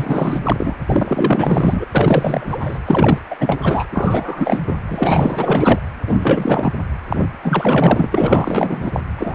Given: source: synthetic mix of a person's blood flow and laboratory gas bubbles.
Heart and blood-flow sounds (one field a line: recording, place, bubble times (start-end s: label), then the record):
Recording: Doppler ultrasound of blood flow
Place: precordium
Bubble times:
0.00-0.39 s: bubbles
0.43-0.75 s: bubbles
0.85-1.85 s: bubbles
1.91-2.79 s: bubbles
2.86-3.19 s: bubbles
3.30-3.35 s: bubbles
3.40-3.86 s: bubbles
3.92-4.59 s: bubbles
4.67-4.77 s: bubbles
4.88-5.79 s: bubbles
6.05-6.73 s: bubbles
7.08-7.29 s: bubbles
7.43-9.02 s: bubbles
9.17-9.35 s: bubbles
From the record:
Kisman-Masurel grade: 444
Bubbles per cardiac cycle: continuous sound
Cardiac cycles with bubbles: 100%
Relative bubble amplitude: maximal (0.775 to 0.999)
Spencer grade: 4 (maximum detectable bubble signal sounding continuously throughout systole and diastole of every cardiac period, and overriding the amplitude of the normal cardiac signals)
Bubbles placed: anywhere in the cardiac cycle